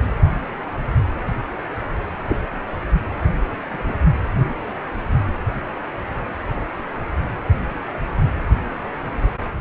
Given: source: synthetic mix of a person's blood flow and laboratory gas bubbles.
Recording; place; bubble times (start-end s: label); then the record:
Doppler ultrasound of blood flow; precordium
2.29-2.37 s: bubbles
3.70-3.94 s: bubbles
From the record:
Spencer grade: 2 (many but less than half of the cardiac periods contain bubble signals, singularly or in groups); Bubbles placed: anywhere in the cardiac cycle